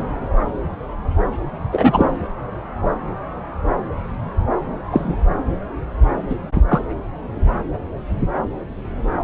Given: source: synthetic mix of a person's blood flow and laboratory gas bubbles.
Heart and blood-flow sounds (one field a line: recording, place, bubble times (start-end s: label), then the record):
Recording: Doppler ultrasound of blood flow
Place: subclavian vein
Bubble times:
1.72-2.12 s: bubbles
4.91-5.16 s: bubbles
6.29-6.35 s: bubbles
6.68-6.81 s: bubbles
From the record:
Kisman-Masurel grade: 123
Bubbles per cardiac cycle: 1 to 2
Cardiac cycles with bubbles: 10 to 50%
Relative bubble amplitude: loud (0.450 to 0.775)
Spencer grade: 2 (many but less than half of the cardiac periods contain bubble signals, singularly or in groups)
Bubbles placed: anywhere in the cardiac cycle